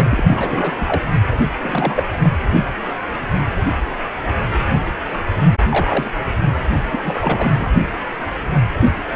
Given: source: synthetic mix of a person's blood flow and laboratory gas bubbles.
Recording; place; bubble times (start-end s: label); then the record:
Doppler ultrasound of blood flow; precordium
0.00-0.24 s: bubbles
0.26-0.73 s: bubbles
0.81-1.02 s: bubbles
1.63-2.03 s: bubbles
2.14-2.18 s: bubbles
2.23-2.29 s: bubbles
5.68-6.14 s: bubbles
6.92-7.00 s: bubbles
7.02-7.66 s: bubbles
From the record:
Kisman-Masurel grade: 232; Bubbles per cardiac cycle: several, 3 to 8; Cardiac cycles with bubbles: 50 to 99%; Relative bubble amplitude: moderate (0.250 to 0.450); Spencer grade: 3 (all of the cardiac periods contain showers or single bubble signals, but not dominating or overriding the cardiac motion signals); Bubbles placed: only in the low amplitude regions of the cardiac cycle